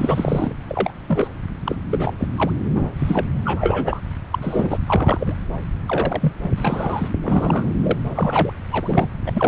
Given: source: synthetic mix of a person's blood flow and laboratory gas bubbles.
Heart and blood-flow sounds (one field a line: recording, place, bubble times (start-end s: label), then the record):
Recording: Doppler ultrasound of blood flow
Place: subclavian vein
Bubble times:
0.00-0.52 s: bubbles
0.68-0.91 s: bubbles
1.08-1.28 s: bubbles
1.66-1.76 s: bubbles
1.91-2.13 s: bubbles
2.18-2.27 s: bubbles
2.36-2.51 s: bubbles
2.74-2.90 s: bubbles
2.97-3.26 s: bubbles
3.44-4.00 s: bubbles
4.32-4.38 s: bubbles
4.42-4.79 s: bubbles
4.87-5.34 s: bubbles
5.86-6.33 s: bubbles
6.58-7.08 s: bubbles
7.23-7.74 s: bubbles
7.83-7.96 s: bubbles
8.15-8.53 s: bubbles
8.71-9.09 s: bubbles
9.26-9.48 s: bubbles
From the record:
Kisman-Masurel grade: 232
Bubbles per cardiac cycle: several, 3 to 8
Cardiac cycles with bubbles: 50 to 99%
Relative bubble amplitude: moderate (0.250 to 0.450)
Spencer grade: 3 (all of the cardiac periods contain showers or single bubble signals, but not dominating or overriding the cardiac motion signals)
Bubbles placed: anywhere in the cardiac cycle